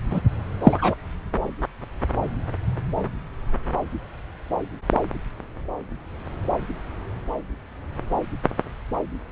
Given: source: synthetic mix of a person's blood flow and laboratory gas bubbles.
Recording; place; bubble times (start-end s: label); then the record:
Doppler ultrasound of blood flow; subclavian vein
0.10-0.20 s: bubbles
0.64-0.95 s: bubbles
From the record:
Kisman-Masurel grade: 123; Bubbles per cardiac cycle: 1 to 2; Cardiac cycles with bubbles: 10 to 50%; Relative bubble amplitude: loud (0.450 to 0.775); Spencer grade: 2 (many but less than half of the cardiac periods contain bubble signals, singularly or in groups); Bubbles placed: anywhere in the cardiac cycle